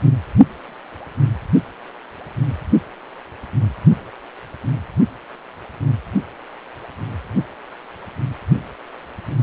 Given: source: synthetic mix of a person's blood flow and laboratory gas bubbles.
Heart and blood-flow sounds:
Doppler ultrasound of blood flow; precordium
no bubbles
From the record:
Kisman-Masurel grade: 000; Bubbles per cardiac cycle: 0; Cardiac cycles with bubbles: 0%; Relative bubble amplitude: no bubbles discernible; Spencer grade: 0 (complete lack of bubble signals)

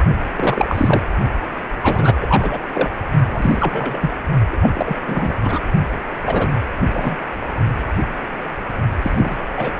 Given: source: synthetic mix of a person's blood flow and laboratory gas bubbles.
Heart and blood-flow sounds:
Doppler ultrasound of blood flow; precordium
0.36-1.02 s: bubbles
1.83-2.15 s: bubbles
2.21-2.58 s: bubbles
2.73-2.90 s: bubbles
3.27-4.10 s: bubbles
4.51-4.56 s: bubbles
4.60-4.70 s: bubbles
4.74-4.96 s: bubbles
5.06-5.33 s: bubbles
5.42-5.59 s: bubbles
6.26-6.47 s: bubbles
6.93-7.16 s: bubbles
9.02-9.36 s: bubbles
9.56-9.71 s: bubbles
From the record:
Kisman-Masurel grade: 233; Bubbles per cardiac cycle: several, 3 to 8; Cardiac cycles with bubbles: 50 to 99%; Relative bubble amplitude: loud (0.450 to 0.775); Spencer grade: 3 (all of the cardiac periods contain showers or single bubble signals, but not dominating or overriding the cardiac motion signals); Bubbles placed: only in the low amplitude regions of the cardiac cycle

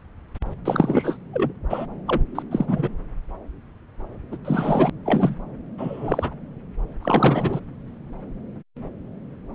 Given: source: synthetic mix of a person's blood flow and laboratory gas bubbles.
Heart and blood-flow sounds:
Doppler ultrasound of blood flow; subclavian vein
0.65-1.17 s: bubbles
1.33-1.53 s: bubbles
1.70-1.86 s: bubbles
2.07-2.21 s: bubbles
2.35-2.43 s: bubbles
2.51-2.89 s: bubbles
4.32-4.37 s: bubbles
4.45-4.90 s: bubbles
5.05-5.36 s: bubbles
5.78-6.33 s: bubbles
7.01-7.60 s: bubbles
From the record:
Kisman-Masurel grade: 223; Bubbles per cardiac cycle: several, 3 to 8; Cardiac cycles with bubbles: 10 to 50%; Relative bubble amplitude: loud (0.450 to 0.775); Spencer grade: 2 (many but less than half of the cardiac periods contain bubble signals, singularly or in groups); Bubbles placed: anywhere in the cardiac cycle

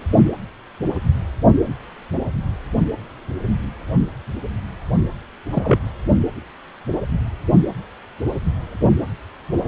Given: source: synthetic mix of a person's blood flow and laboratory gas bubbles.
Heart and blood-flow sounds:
Doppler ultrasound of blood flow; precordium
5.52-5.78 s: bubbles
From the record:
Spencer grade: 2 (many but less than half of the cardiac periods contain bubble signals, singularly or in groups); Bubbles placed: only in the low amplitude regions of the cardiac cycle

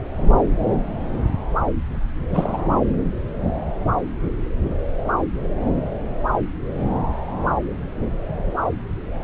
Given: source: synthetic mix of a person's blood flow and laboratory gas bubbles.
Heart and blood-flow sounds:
Doppler ultrasound of blood flow; subclavian vein
2.30-2.67 s: bubbles
From the record:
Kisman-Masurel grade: 212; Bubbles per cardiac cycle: several, 3 to 8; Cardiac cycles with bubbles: 1 to 10%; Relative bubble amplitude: moderate (0.250 to 0.450); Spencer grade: 1 (occasional bubble signal discernible with the cardiac motion signal, with majority of cardiac periods free of bubbles); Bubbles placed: anywhere in the cardiac cycle

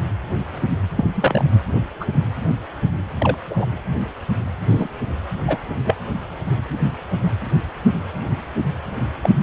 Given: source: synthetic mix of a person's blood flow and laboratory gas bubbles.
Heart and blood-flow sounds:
Doppler ultrasound of blood flow; precordium
0.97-1.11 s: bubbles
1.16-1.44 s: bubbles
1.75-1.81 s: bubbles
2.00-2.06 s: bubbles
3.18-3.38 s: bubbles
3.50-3.65 s: bubbles
4.70-4.89 s: bubbles
5.47-5.57 s: bubbles
5.84-5.95 s: bubbles
9.23-9.29 s: bubbles
From the record:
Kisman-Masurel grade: 122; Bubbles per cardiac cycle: 1 to 2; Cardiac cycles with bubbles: 10 to 50%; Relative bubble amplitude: moderate (0.250 to 0.450); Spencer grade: 2 (many but less than half of the cardiac periods contain bubble signals, singularly or in groups); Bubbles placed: anywhere in the cardiac cycle

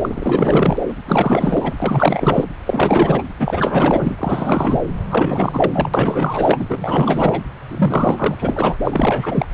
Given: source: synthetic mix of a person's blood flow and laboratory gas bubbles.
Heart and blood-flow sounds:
Doppler ultrasound of blood flow; subclavian vein
0.02-0.78 s: bubbles
0.88-0.93 s: bubbles
1.06-1.74 s: bubbles
1.81-2.47 s: bubbles
2.65-3.23 s: bubbles
3.39-4.16 s: bubbles
4.18-4.79 s: bubbles
5.09-5.89 s: bubbles
5.93-7.42 s: bubbles
7.70-8.36 s: bubbles
8.38-8.77 s: bubbles
8.84-9.46 s: bubbles
From the record:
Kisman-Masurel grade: 444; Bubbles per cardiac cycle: continuous sound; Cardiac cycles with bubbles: 100%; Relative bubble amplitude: maximal (0.775 to 0.999); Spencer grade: 4 (maximum detectable bubble signal sounding continuously throughout systole and diastole of every cardiac period, and overriding the amplitude of the normal cardiac signals); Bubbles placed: anywhere in the cardiac cycle

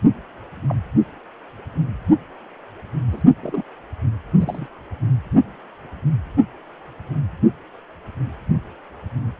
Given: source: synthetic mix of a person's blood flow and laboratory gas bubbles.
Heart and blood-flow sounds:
Doppler ultrasound of blood flow; precordium
0.68-0.76 s: bubbles
3.12-3.22 s: bubbles
3.42-3.62 s: bubbles
4.38-4.66 s: bubbles
From the record:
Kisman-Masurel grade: 121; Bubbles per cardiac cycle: 1 to 2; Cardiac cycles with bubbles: 10 to 50%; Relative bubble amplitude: barely perceptible (0.100 to 0.250); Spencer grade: 2 (many but less than half of the cardiac periods contain bubble signals, singularly or in groups); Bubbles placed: anywhere in the cardiac cycle

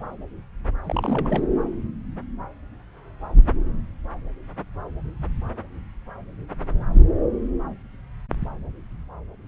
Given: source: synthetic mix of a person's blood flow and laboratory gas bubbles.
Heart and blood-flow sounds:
Doppler ultrasound of blood flow; subclavian vein
0.84-1.46 s: bubbles
From the record:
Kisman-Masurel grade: 211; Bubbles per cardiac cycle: several, 3 to 8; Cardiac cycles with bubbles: 1 to 10%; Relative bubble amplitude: barely perceptible (0.100 to 0.250); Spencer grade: 1 (occasional bubble signal discernible with the cardiac motion signal, with majority of cardiac periods free of bubbles); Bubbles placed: anywhere in the cardiac cycle

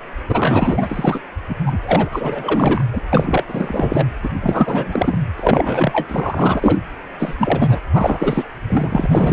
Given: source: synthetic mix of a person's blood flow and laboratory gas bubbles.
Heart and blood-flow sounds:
Doppler ultrasound of blood flow; precordium
0.28-1.20 s: bubbles
1.49-1.56 s: bubbles
1.66-1.78 s: bubbles
1.84-2.09 s: bubbles
2.12-2.84 s: bubbles
2.93-3.00 s: bubbles
3.12-3.44 s: bubbles
3.47-4.08 s: bubbles
4.23-4.29 s: bubbles
4.41-5.19 s: bubbles
5.37-6.79 s: bubbles
7.19-7.35 s: bubbles
7.39-7.80 s: bubbles
7.92-8.44 s: bubbles
8.69-9.33 s: bubbles
From the record:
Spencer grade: 4 (maximum detectable bubble signal sounding continuously throughout systole and diastole of every cardiac period, and overriding the amplitude of the normal cardiac signals); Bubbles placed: anywhere in the cardiac cycle

